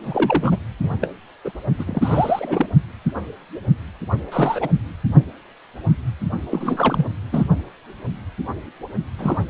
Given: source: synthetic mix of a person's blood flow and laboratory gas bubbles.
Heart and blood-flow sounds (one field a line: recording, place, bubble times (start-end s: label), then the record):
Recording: Doppler ultrasound of blood flow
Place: precordium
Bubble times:
0.02-0.56 s: bubbles
0.83-0.91 s: bubbles
1.01-1.07 s: bubbles
1.45-1.52 s: bubbles
1.79-2.67 s: bubbles
4.32-4.69 s: bubbles
6.50-7.06 s: bubbles
7.32-7.44 s: bubbles
9.18-9.45 s: bubbles
From the record:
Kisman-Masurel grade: 232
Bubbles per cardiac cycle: several, 3 to 8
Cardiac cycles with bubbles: 50 to 99%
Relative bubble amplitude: moderate (0.250 to 0.450)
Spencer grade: 3 (all of the cardiac periods contain showers or single bubble signals, but not dominating or overriding the cardiac motion signals)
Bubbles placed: only in the low amplitude regions of the cardiac cycle